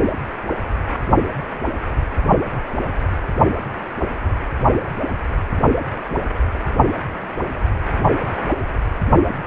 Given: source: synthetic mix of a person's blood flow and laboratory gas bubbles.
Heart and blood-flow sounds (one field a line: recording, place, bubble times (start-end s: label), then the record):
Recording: Doppler ultrasound of blood flow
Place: precordium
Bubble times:
no bubbles
From the record:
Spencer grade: 0 (complete lack of bubble signals)